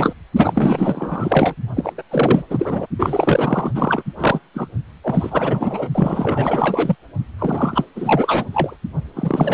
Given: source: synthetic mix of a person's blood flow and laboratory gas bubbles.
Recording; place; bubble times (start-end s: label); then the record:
Doppler ultrasound of blood flow; precordium
0.00-0.14 s: bubbles
0.36-1.54 s: bubbles
1.75-1.93 s: bubbles
1.98-2.03 s: bubbles
2.10-2.43 s: bubbles
2.50-2.86 s: bubbles
2.98-3.71 s: bubbles
3.74-4.03 s: bubbles
4.18-4.39 s: bubbles
4.54-4.68 s: bubbles
5.04-5.88 s: bubbles
5.94-6.96 s: bubbles
7.38-7.85 s: bubbles
7.95-8.77 s: bubbles
9.16-9.54 s: bubbles
From the record:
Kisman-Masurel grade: 444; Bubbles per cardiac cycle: continuous sound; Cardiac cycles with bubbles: 100%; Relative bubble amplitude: maximal (0.775 to 0.999); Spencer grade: 4 (maximum detectable bubble signal sounding continuously throughout systole and diastole of every cardiac period, and overriding the amplitude of the normal cardiac signals); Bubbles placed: only in the low amplitude regions of the cardiac cycle